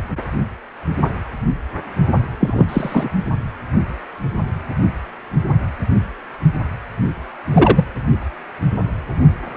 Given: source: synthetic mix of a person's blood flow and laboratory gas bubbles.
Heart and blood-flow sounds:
Doppler ultrasound of blood flow; precordium
2.40-2.65 s: bubbles
2.69-3.11 s: bubbles
7.53-7.85 s: bubbles
From the record:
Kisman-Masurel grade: 223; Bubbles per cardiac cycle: several, 3 to 8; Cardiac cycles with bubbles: 10 to 50%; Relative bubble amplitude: loud (0.450 to 0.775); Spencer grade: 2 (many but less than half of the cardiac periods contain bubble signals, singularly or in groups); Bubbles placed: anywhere in the cardiac cycle

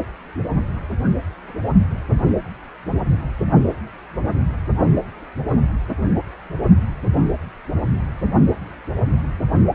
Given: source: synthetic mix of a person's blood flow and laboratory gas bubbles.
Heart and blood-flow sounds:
Doppler ultrasound of blood flow; precordium
no bubbles
From the record:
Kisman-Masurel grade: 000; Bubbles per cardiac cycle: 0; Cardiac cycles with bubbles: 0%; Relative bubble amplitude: no bubbles discernible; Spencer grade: 0 (complete lack of bubble signals)

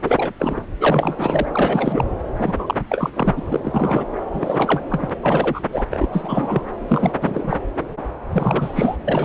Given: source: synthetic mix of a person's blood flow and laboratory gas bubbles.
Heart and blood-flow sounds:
Doppler ultrasound of blood flow; subclavian vein
0.02-0.32 s: bubbles
0.40-0.60 s: bubbles
0.80-1.45 s: bubbles
1.53-2.04 s: bubbles
2.38-2.54 s: bubbles
2.58-2.75 s: bubbles
2.89-3.10 s: bubbles
3.13-3.33 s: bubbles
3.36-4.04 s: bubbles
4.33-4.81 s: bubbles
4.91-5.10 s: bubbles
5.23-5.61 s: bubbles
5.72-5.83 s: bubbles
5.91-6.09 s: bubbles
6.12-6.63 s: bubbles
6.88-7.12 s: bubbles
7.21-7.57 s: bubbles
8.32-8.96 s: bubbles
9.05-9.25 s: bubbles
From the record:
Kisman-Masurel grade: 332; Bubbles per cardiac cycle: rolling drumbeat, 9 or more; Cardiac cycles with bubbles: 50 to 99%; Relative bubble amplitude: moderate (0.250 to 0.450); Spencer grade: 3 (all of the cardiac periods contain showers or single bubble signals, but not dominating or overriding the cardiac motion signals); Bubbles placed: anywhere in the cardiac cycle

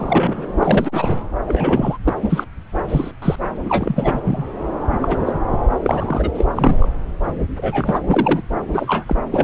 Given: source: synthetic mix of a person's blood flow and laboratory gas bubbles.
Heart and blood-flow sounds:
Doppler ultrasound of blood flow; subclavian vein
0.00-0.53 s: bubbles
0.60-1.17 s: bubbles
1.46-1.98 s: bubbles
2.06-2.13 s: bubbles
2.23-2.44 s: bubbles
2.88-3.12 s: bubbles
3.22-3.36 s: bubbles
3.62-4.21 s: bubbles
4.24-4.43 s: bubbles
4.92-4.99 s: bubbles
5.01-5.18 s: bubbles
5.25-5.33 s: bubbles
5.83-6.29 s: bubbles
6.34-6.46 s: bubbles
6.56-6.89 s: bubbles
7.57-8.01 s: bubbles
8.07-8.41 s: bubbles
8.71-9.04 s: bubbles
9.07-9.15 s: bubbles
9.31-9.44 s: bubbles
From the record:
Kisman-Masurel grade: 233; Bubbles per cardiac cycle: several, 3 to 8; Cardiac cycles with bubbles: 50 to 99%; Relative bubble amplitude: loud (0.450 to 0.775); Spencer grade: 3 (all of the cardiac periods contain showers or single bubble signals, but not dominating or overriding the cardiac motion signals); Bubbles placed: anywhere in the cardiac cycle

